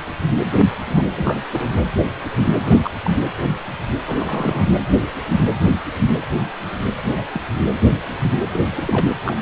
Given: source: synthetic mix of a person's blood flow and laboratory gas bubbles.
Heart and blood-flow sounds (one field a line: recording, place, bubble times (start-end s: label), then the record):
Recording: Doppler ultrasound of blood flow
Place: precordium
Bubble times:
0.83-1.44 s: bubbles
1.53-1.70 s: bubbles
2.64-2.93 s: bubbles
3.04-3.11 s: bubbles
4.06-4.69 s: bubbles
7.04-7.26 s: bubbles
7.33-7.41 s: bubbles
8.53-8.60 s: bubbles
8.70-9.06 s: bubbles
9.26-9.37 s: bubbles
From the record:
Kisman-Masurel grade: 221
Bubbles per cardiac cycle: several, 3 to 8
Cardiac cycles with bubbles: 10 to 50%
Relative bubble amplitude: barely perceptible (0.100 to 0.250)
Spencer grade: 2 (many but less than half of the cardiac periods contain bubble signals, singularly or in groups)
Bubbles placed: anywhere in the cardiac cycle